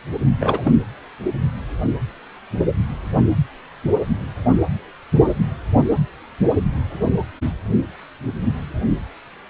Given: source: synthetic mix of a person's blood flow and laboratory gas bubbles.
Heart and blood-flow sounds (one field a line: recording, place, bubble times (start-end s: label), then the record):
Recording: Doppler ultrasound of blood flow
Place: precordium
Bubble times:
0.40-0.71 s: bubbles
From the record:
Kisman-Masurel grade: 212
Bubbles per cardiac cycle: several, 3 to 8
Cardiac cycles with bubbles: 1 to 10%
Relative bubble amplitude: moderate (0.250 to 0.450)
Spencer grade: 1 (occasional bubble signal discernible with the cardiac motion signal, with majority of cardiac periods free of bubbles)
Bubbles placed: anywhere in the cardiac cycle